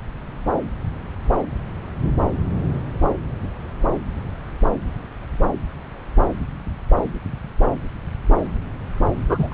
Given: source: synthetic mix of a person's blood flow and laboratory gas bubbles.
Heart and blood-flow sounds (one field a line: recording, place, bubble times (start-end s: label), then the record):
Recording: Doppler ultrasound of blood flow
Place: subclavian vein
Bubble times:
9.29-9.47 s: bubbles
9.51-9.54 s: bubbles
From the record:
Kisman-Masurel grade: 213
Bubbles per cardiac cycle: several, 3 to 8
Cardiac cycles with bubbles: 1 to 10%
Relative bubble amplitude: loud (0.450 to 0.775)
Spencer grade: 1 (occasional bubble signal discernible with the cardiac motion signal, with majority of cardiac periods free of bubbles)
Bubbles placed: anywhere in the cardiac cycle